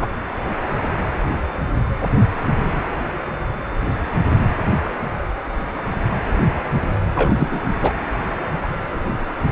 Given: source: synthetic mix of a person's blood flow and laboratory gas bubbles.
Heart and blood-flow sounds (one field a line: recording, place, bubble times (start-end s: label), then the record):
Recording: Doppler ultrasound of blood flow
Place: precordium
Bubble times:
0.00-0.09 s: bubbles
7.15-7.60 s: bubbles
7.80-7.92 s: bubbles
From the record:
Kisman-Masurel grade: 222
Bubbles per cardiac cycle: several, 3 to 8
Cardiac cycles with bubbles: 10 to 50%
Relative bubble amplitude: moderate (0.250 to 0.450)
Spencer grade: 2 (many but less than half of the cardiac periods contain bubble signals, singularly or in groups)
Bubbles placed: anywhere in the cardiac cycle